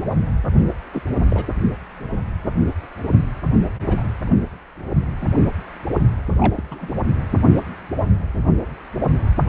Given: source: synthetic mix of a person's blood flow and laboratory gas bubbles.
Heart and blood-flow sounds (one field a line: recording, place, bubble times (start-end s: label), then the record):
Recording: Doppler ultrasound of blood flow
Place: precordium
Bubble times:
0.92-1.02 s: bubbles
1.29-1.46 s: bubbles
3.88-4.03 s: bubbles
4.27-4.36 s: bubbles
5.21-5.30 s: bubbles
6.39-6.63 s: bubbles
6.71-6.88 s: bubbles
From the record:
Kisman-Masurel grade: 222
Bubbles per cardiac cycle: several, 3 to 8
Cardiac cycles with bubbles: 10 to 50%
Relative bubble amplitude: moderate (0.250 to 0.450)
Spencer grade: 2 (many but less than half of the cardiac periods contain bubble signals, singularly or in groups)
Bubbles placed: anywhere in the cardiac cycle